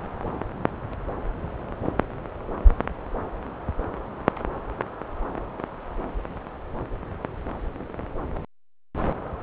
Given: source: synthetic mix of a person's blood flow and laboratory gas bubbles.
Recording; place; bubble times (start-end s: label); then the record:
Doppler ultrasound of blood flow; subclavian vein
no bubbles
From the record:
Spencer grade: 0 (complete lack of bubble signals)